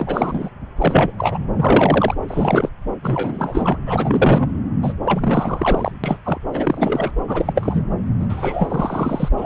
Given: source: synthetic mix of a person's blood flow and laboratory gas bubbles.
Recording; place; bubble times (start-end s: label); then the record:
Doppler ultrasound of blood flow; subclavian vein
0.00-0.50 s: bubbles
0.78-1.12 s: bubbles
1.18-1.38 s: bubbles
1.56-2.15 s: bubbles
2.27-2.69 s: bubbles
3.02-3.77 s: bubbles
3.85-4.50 s: bubbles
4.82-4.93 s: bubbles
5.04-5.92 s: bubbles
6.04-6.20 s: bubbles
6.24-6.39 s: bubbles
6.53-7.11 s: bubbles
7.28-7.86 s: bubbles
8.19-9.28 s: bubbles
9.36-9.46 s: bubbles
From the record:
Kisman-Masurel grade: 343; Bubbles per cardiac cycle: rolling drumbeat, 9 or more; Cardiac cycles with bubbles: 100%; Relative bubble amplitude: loud (0.450 to 0.775); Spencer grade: 3 (all of the cardiac periods contain showers or single bubble signals, but not dominating or overriding the cardiac motion signals); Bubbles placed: anywhere in the cardiac cycle